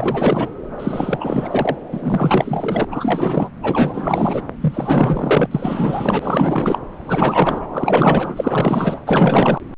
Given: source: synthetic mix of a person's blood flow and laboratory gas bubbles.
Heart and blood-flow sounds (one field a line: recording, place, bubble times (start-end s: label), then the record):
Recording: Doppler ultrasound of blood flow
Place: subclavian vein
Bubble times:
0.00-0.50 s: bubbles
0.78-1.76 s: bubbles
1.92-2.85 s: bubbles
2.91-3.50 s: bubbles
3.62-4.42 s: bubbles
4.61-5.47 s: bubbles
5.51-6.79 s: bubbles
6.92-7.67 s: bubbles
7.70-8.99 s: bubbles
9.05-9.59 s: bubbles
From the record:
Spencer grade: 4 (maximum detectable bubble signal sounding continuously throughout systole and diastole of every cardiac period, and overriding the amplitude of the normal cardiac signals)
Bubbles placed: anywhere in the cardiac cycle